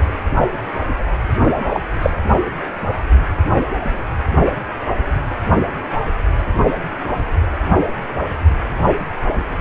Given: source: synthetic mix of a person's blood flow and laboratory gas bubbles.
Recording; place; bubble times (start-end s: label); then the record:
Doppler ultrasound of blood flow; precordium
1.42-1.81 s: bubbles
2.02-2.10 s: bubbles
From the record:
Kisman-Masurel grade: 123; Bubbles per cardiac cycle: 1 to 2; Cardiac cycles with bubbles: 10 to 50%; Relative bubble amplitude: loud (0.450 to 0.775); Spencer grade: 2 (many but less than half of the cardiac periods contain bubble signals, singularly or in groups); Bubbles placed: anywhere in the cardiac cycle